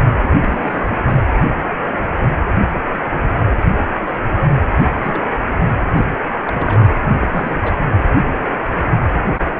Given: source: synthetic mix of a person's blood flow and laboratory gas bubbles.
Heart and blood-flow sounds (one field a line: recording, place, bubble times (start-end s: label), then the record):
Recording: Doppler ultrasound of blood flow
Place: precordium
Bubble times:
0.23-0.30 s: bubbles
0.42-0.96 s: bubbles
1.05-1.21 s: bubbles
4.98-5.28 s: bubbles
5.30-5.37 s: bubbles
5.96-6.01 s: bubbles
6.45-6.89 s: bubbles
7.07-7.80 s: bubbles
From the record:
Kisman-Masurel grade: 221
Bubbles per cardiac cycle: several, 3 to 8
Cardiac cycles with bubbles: 10 to 50%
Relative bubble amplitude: barely perceptible (0.100 to 0.250)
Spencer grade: 2 (many but less than half of the cardiac periods contain bubble signals, singularly or in groups)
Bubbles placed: anywhere in the cardiac cycle